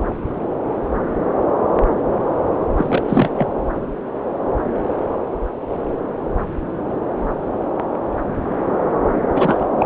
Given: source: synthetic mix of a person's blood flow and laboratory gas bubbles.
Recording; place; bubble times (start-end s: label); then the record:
Doppler ultrasound of blood flow; subclavian vein
2.75-3.02 s: bubbles
3.08-3.31 s: bubbles
3.34-3.48 s: bubbles
9.35-9.65 s: bubbles
9.79-9.86 s: bubbles
From the record:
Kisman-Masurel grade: 223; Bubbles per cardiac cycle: several, 3 to 8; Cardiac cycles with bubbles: 10 to 50%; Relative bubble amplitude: loud (0.450 to 0.775); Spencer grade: 2 (many but less than half of the cardiac periods contain bubble signals, singularly or in groups); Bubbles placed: anywhere in the cardiac cycle